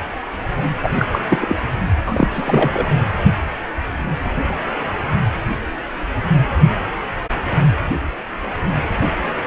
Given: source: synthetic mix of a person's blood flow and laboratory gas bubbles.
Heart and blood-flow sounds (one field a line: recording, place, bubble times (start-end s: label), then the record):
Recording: Doppler ultrasound of blood flow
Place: precordium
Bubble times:
0.82-0.89 s: bubbles
0.99-1.06 s: bubbles
1.12-1.19 s: bubbles
1.30-1.57 s: bubbles
2.06-2.28 s: bubbles
2.31-2.87 s: bubbles
From the record:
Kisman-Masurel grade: 223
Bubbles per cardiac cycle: several, 3 to 8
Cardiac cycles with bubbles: 10 to 50%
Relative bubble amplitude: loud (0.450 to 0.775)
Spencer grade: 2 (many but less than half of the cardiac periods contain bubble signals, singularly or in groups)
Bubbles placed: anywhere in the cardiac cycle